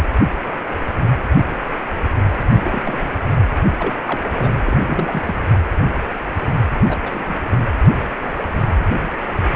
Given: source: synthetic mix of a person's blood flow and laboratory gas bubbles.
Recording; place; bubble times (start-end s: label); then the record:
Doppler ultrasound of blood flow; precordium
2.51-2.81 s: bubbles
2.84-3.10 s: bubbles
3.71-3.96 s: bubbles
4.05-4.20 s: bubbles
4.35-4.51 s: bubbles
4.59-4.80 s: bubbles
4.87-5.22 s: bubbles
5.27-5.34 s: bubbles
6.82-6.97 s: bubbles
7.04-7.57 s: bubbles
From the record:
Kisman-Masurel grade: 222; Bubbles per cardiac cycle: several, 3 to 8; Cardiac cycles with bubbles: 10 to 50%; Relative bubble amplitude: moderate (0.250 to 0.450); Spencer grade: 2 (many but less than half of the cardiac periods contain bubble signals, singularly or in groups); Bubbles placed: anywhere in the cardiac cycle